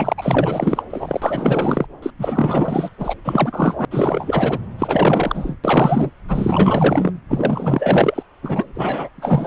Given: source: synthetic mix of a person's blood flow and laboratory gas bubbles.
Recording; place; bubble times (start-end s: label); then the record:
Doppler ultrasound of blood flow; subclavian vein
0.00-0.14 s: bubbles
0.18-0.84 s: bubbles
0.89-1.86 s: bubbles
2.02-2.10 s: bubbles
2.19-2.89 s: bubbles
2.99-3.15 s: bubbles
3.25-3.85 s: bubbles
3.91-4.59 s: bubbles
4.78-5.55 s: bubbles
5.63-6.10 s: bubbles
6.28-7.12 s: bubbles
7.29-8.23 s: bubbles
8.43-8.66 s: bubbles
8.74-9.09 s: bubbles
9.15-9.47 s: bubbles
From the record:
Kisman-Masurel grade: 444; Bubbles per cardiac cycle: continuous sound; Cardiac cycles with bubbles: 100%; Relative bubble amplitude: maximal (0.775 to 0.999); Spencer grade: 4 (maximum detectable bubble signal sounding continuously throughout systole and diastole of every cardiac period, and overriding the amplitude of the normal cardiac signals); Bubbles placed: anywhere in the cardiac cycle